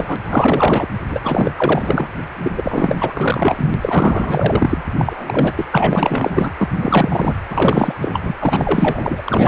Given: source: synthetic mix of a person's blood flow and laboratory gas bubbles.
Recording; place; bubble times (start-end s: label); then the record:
Doppler ultrasound of blood flow; precordium
0.00-0.16 s: bubbles
0.22-0.88 s: bubbles
1.09-1.20 s: bubbles
1.24-1.51 s: bubbles
1.56-2.10 s: bubbles
2.44-2.52 s: bubbles
2.56-3.75 s: bubbles
3.81-4.82 s: bubbles
4.98-5.53 s: bubbles
5.56-5.64 s: bubbles
5.72-6.50 s: bubbles
6.58-6.68 s: bubbles
6.77-7.36 s: bubbles
7.50-7.94 s: bubbles
8.01-8.32 s: bubbles
8.39-9.21 s: bubbles
9.24-9.48 s: bubbles
From the record:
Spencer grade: 4 (maximum detectable bubble signal sounding continuously throughout systole and diastole of every cardiac period, and overriding the amplitude of the normal cardiac signals); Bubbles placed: anywhere in the cardiac cycle